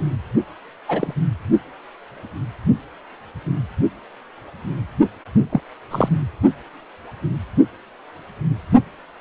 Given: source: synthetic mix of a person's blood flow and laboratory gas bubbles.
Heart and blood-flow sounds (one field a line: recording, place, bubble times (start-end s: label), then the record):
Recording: Doppler ultrasound of blood flow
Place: precordium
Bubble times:
0.88-1.13 s: bubbles
5.49-5.61 s: bubbles
5.91-6.09 s: bubbles
From the record:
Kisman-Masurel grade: 122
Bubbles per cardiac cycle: 1 to 2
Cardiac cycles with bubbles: 10 to 50%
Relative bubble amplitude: moderate (0.250 to 0.450)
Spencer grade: 2 (many but less than half of the cardiac periods contain bubble signals, singularly or in groups)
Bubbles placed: only in the low amplitude regions of the cardiac cycle